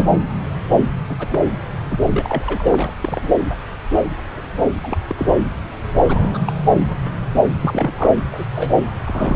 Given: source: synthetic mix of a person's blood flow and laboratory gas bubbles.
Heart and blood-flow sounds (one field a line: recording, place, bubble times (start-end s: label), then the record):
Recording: Doppler ultrasound of blood flow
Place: subclavian vein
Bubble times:
0.00-0.07 s: bubbles
1.08-1.16 s: bubbles
1.19-1.40 s: bubbles
1.90-2.00 s: bubbles
2.11-2.69 s: bubbles
2.71-2.92 s: bubbles
3.00-3.28 s: bubbles
4.83-4.97 s: bubbles
5.07-5.38 s: bubbles
6.03-6.52 s: bubbles
7.61-7.92 s: bubbles
7.95-8.12 s: bubbles
8.16-8.25 s: bubbles
8.31-8.45 s: bubbles
8.54-8.78 s: bubbles
9.04-9.36 s: bubbles
From the record:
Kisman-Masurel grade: 232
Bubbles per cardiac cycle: several, 3 to 8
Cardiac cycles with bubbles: 50 to 99%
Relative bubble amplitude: moderate (0.250 to 0.450)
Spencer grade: 3 (all of the cardiac periods contain showers or single bubble signals, but not dominating or overriding the cardiac motion signals)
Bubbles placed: anywhere in the cardiac cycle